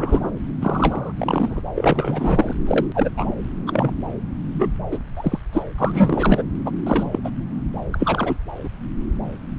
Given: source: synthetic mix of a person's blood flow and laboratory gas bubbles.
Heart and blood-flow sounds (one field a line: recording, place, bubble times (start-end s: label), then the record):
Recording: Doppler ultrasound of blood flow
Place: subclavian vein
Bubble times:
0.00-0.30 s: bubbles
0.61-1.12 s: bubbles
1.15-1.62 s: bubbles
1.75-2.53 s: bubbles
2.67-2.86 s: bubbles
2.94-3.10 s: bubbles
3.17-3.34 s: bubbles
3.67-3.91 s: bubbles
4.59-4.69 s: bubbles
4.91-4.99 s: bubbles
5.17-5.39 s: bubbles
5.53-5.62 s: bubbles
5.78-6.43 s: bubbles
6.66-6.71 s: bubbles
6.84-7.08 s: bubbles
7.12-7.20 s: bubbles
7.24-7.31 s: bubbles
7.92-8.38 s: bubbles
8.64-8.69 s: bubbles
From the record:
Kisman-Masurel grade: 233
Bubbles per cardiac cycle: several, 3 to 8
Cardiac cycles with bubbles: 50 to 99%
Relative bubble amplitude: loud (0.450 to 0.775)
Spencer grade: 3 (all of the cardiac periods contain showers or single bubble signals, but not dominating or overriding the cardiac motion signals)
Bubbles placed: anywhere in the cardiac cycle